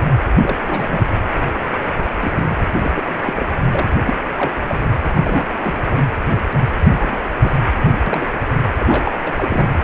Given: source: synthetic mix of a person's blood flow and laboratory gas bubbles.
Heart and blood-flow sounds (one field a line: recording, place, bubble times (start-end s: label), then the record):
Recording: Doppler ultrasound of blood flow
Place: precordium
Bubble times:
0.36-1.06 s: bubbles
1.64-1.70 s: bubbles
1.83-1.94 s: bubbles
2.02-2.06 s: bubbles
2.20-2.32 s: bubbles
2.35-2.59 s: bubbles
2.77-2.92 s: bubbles
2.96-3.18 s: bubbles
3.25-3.46 s: bubbles
3.71-3.87 s: bubbles
4.05-4.15 s: bubbles
4.36-4.52 s: bubbles
4.68-4.79 s: bubbles
5.08-5.89 s: bubbles
6.83-7.29 s: bubbles
7.41-7.64 s: bubbles
7.81-7.91 s: bubbles
8.06-8.27 s: bubbles
8.79-9.12 s: bubbles
9.24-9.33 s: bubbles
9.37-9.73 s: bubbles
From the record:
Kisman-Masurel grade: 242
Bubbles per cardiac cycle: several, 3 to 8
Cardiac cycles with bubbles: 100%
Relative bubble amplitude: moderate (0.250 to 0.450)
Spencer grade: 3 (all of the cardiac periods contain showers or single bubble signals, but not dominating or overriding the cardiac motion signals)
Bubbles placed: anywhere in the cardiac cycle